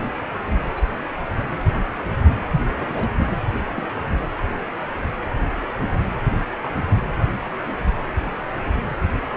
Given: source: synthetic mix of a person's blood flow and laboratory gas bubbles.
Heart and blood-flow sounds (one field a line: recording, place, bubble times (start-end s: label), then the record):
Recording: Doppler ultrasound of blood flow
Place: precordium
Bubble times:
0.77-0.83 s: bubbles
2.78-3.13 s: bubbles
3.75-3.87 s: bubbles
5.81-5.86 s: bubbles
6.62-6.69 s: bubbles
From the record:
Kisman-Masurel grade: 121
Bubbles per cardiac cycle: 1 to 2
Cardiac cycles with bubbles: 10 to 50%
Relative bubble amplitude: barely perceptible (0.100 to 0.250)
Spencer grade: 2 (many but less than half of the cardiac periods contain bubble signals, singularly or in groups)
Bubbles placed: anywhere in the cardiac cycle